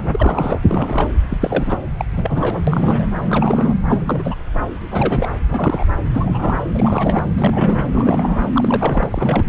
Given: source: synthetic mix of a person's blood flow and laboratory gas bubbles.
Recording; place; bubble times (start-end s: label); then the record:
Doppler ultrasound of blood flow; subclavian vein
0.00-0.09 s: bubbles
0.11-0.59 s: bubbles
0.67-1.08 s: bubbles
1.29-1.38 s: bubbles
1.40-1.86 s: bubbles
1.97-2.05 s: bubbles
2.12-2.61 s: bubbles
2.67-3.07 s: bubbles
3.29-3.75 s: bubbles
3.88-4.35 s: bubbles
4.90-5.35 s: bubbles
5.47-5.86 s: bubbles
6.13-6.57 s: bubbles
6.74-7.24 s: bubbles
7.37-7.85 s: bubbles
7.92-8.41 s: bubbles
8.54-9.49 s: bubbles
From the record:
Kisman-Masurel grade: 332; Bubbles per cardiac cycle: rolling drumbeat, 9 or more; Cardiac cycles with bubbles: 50 to 99%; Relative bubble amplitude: moderate (0.250 to 0.450); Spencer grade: 3 (all of the cardiac periods contain showers or single bubble signals, but not dominating or overriding the cardiac motion signals); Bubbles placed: anywhere in the cardiac cycle